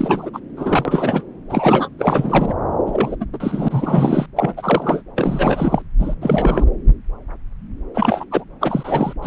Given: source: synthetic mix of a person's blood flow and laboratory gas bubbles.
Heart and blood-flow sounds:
Doppler ultrasound of blood flow; subclavian vein
0.00-0.30 s: bubbles
0.33-0.40 s: bubbles
0.56-1.24 s: bubbles
1.49-1.89 s: bubbles
1.98-2.54 s: bubbles
2.86-3.16 s: bubbles
3.20-3.25 s: bubbles
3.33-4.26 s: bubbles
4.36-5.03 s: bubbles
5.16-5.82 s: bubbles
5.99-6.15 s: bubbles
6.21-6.64 s: bubbles
7.94-8.25 s: bubbles
8.30-8.44 s: bubbles
8.61-9.13 s: bubbles
9.22-9.27 s: bubbles
From the record:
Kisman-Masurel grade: 333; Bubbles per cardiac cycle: rolling drumbeat, 9 or more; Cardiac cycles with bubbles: 50 to 99%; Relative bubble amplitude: loud (0.450 to 0.775); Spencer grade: 3 (all of the cardiac periods contain showers or single bubble signals, but not dominating or overriding the cardiac motion signals); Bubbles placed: anywhere in the cardiac cycle

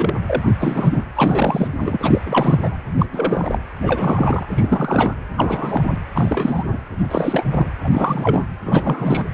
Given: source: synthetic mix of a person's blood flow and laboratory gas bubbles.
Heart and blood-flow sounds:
Doppler ultrasound of blood flow; precordium
0.00-0.14 s: bubbles
0.27-0.55 s: bubbles
0.59-1.04 s: bubbles
1.16-1.68 s: bubbles
1.80-2.21 s: bubbles
2.25-2.77 s: bubbles
2.98-3.06 s: bubbles
3.12-3.59 s: bubbles
3.81-4.45 s: bubbles
4.50-5.15 s: bubbles
5.37-5.99 s: bubbles
6.13-6.76 s: bubbles
6.99-7.07 s: bubbles
7.10-7.46 s: bubbles
7.50-7.67 s: bubbles
7.84-7.89 s: bubbles
7.92-8.45 s: bubbles
8.65-9.26 s: bubbles
From the record:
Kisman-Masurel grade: 343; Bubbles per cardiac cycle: rolling drumbeat, 9 or more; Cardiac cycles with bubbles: 100%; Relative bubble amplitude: loud (0.450 to 0.775); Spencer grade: 3 (all of the cardiac periods contain showers or single bubble signals, but not dominating or overriding the cardiac motion signals); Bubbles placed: anywhere in the cardiac cycle

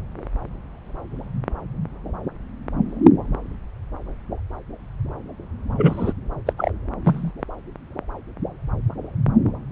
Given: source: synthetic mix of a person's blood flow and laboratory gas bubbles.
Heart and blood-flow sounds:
Doppler ultrasound of blood flow; subclavian vein
5.76-6.13 s: bubbles
6.46-6.53 s: bubbles
6.58-6.72 s: bubbles
7.04-7.33 s: bubbles
From the record:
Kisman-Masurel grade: 212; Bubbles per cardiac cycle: several, 3 to 8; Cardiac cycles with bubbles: 1 to 10%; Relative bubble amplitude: moderate (0.250 to 0.450); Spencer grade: 1 (occasional bubble signal discernible with the cardiac motion signal, with majority of cardiac periods free of bubbles); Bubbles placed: anywhere in the cardiac cycle

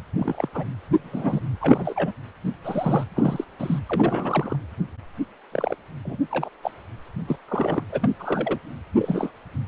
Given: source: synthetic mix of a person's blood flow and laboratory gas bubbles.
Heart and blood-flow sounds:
Doppler ultrasound of blood flow; precordium
0.18-0.49 s: bubbles
0.54-0.65 s: bubbles
0.94-1.41 s: bubbles
1.60-2.12 s: bubbles
2.44-2.52 s: bubbles
2.65-3.04 s: bubbles
3.15-3.44 s: bubbles
3.59-3.79 s: bubbles
3.86-4.56 s: bubbles
5.51-5.76 s: bubbles
6.05-6.17 s: bubbles
6.30-6.49 s: bubbles
6.62-6.71 s: bubbles
7.27-7.36 s: bubbles
7.48-7.83 s: bubbles
7.91-8.11 s: bubbles
8.19-8.58 s: bubbles
8.98-9.31 s: bubbles
From the record:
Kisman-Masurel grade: 242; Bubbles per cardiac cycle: several, 3 to 8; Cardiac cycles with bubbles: 100%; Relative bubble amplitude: moderate (0.250 to 0.450); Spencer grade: 3 (all of the cardiac periods contain showers or single bubble signals, but not dominating or overriding the cardiac motion signals); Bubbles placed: anywhere in the cardiac cycle

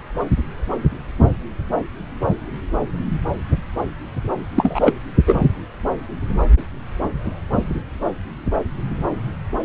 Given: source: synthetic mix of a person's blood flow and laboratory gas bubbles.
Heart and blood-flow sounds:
Doppler ultrasound of blood flow; subclavian vein
4.56-4.92 s: bubbles
5.26-5.39 s: bubbles
From the record:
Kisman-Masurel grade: 113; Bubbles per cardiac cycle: 1 to 2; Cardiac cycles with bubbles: 1 to 10%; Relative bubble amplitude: loud (0.450 to 0.775); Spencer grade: 1 (occasional bubble signal discernible with the cardiac motion signal, with majority of cardiac periods free of bubbles); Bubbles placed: anywhere in the cardiac cycle

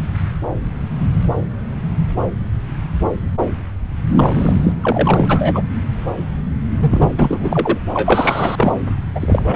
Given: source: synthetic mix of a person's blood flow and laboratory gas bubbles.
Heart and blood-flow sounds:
Doppler ultrasound of blood flow; subclavian vein
4.17-4.72 s: bubbles
4.81-5.62 s: bubbles
6.79-7.10 s: bubbles
7.17-7.79 s: bubbles
7.94-8.78 s: bubbles
9.15-9.56 s: bubbles
From the record:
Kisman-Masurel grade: 333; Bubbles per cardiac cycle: rolling drumbeat, 9 or more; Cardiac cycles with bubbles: 50 to 99%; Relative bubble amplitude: loud (0.450 to 0.775); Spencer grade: 3 (all of the cardiac periods contain showers or single bubble signals, but not dominating or overriding the cardiac motion signals); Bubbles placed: anywhere in the cardiac cycle

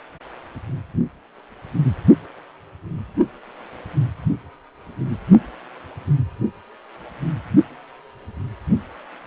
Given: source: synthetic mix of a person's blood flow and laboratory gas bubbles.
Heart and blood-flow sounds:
Doppler ultrasound of blood flow; precordium
no bubbles
From the record:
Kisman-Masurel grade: 000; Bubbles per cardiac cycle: 0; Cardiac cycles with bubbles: 0%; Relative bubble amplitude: no bubbles discernible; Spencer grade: 0 (complete lack of bubble signals)

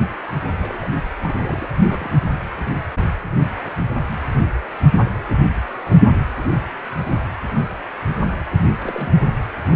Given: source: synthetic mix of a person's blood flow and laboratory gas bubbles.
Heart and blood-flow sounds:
Doppler ultrasound of blood flow; precordium
0.61-0.88 s: bubbles
1.24-1.72 s: bubbles
1.79-2.10 s: bubbles
8.79-9.25 s: bubbles
9.56-9.76 s: bubbles
From the record:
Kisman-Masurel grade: 221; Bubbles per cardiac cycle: several, 3 to 8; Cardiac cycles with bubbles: 10 to 50%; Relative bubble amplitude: barely perceptible (0.100 to 0.250); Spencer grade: 2 (many but less than half of the cardiac periods contain bubble signals, singularly or in groups); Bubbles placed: anywhere in the cardiac cycle

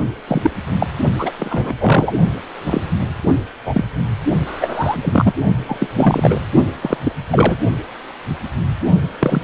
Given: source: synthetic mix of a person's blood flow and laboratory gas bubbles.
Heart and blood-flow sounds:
Doppler ultrasound of blood flow; precordium
0.27-0.51 s: bubbles
0.79-0.86 s: bubbles
1.19-1.32 s: bubbles
1.39-1.74 s: bubbles
1.80-2.13 s: bubbles
2.65-2.80 s: bubbles
3.65-3.84 s: bubbles
4.46-5.33 s: bubbles
5.66-5.77 s: bubbles
5.79-5.88 s: bubbles
5.96-6.40 s: bubbles
6.81-6.98 s: bubbles
7.04-7.12 s: bubbles
7.30-7.58 s: bubbles
9.19-9.42 s: bubbles
From the record:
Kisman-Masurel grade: 233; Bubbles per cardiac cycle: several, 3 to 8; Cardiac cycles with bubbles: 50 to 99%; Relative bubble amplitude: loud (0.450 to 0.775); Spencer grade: 3 (all of the cardiac periods contain showers or single bubble signals, but not dominating or overriding the cardiac motion signals); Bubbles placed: only in the low amplitude regions of the cardiac cycle

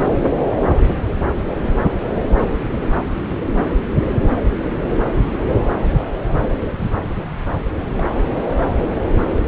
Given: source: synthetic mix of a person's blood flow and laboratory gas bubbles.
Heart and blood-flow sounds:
Doppler ultrasound of blood flow; subclavian vein
7.97-8.18 s: bubbles
From the record:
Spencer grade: 1 (occasional bubble signal discernible with the cardiac motion signal, with majority of cardiac periods free of bubbles); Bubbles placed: anywhere in the cardiac cycle

